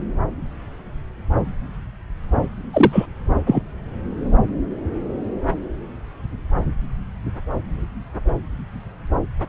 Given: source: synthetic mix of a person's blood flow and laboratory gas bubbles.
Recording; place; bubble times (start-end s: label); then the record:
Doppler ultrasound of blood flow; subclavian vein
2.73-3.06 s: bubbles
3.47-3.62 s: bubbles
From the record:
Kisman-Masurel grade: 213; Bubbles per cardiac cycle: several, 3 to 8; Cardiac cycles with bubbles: 1 to 10%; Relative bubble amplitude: loud (0.450 to 0.775); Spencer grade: 1 (occasional bubble signal discernible with the cardiac motion signal, with majority of cardiac periods free of bubbles); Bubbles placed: anywhere in the cardiac cycle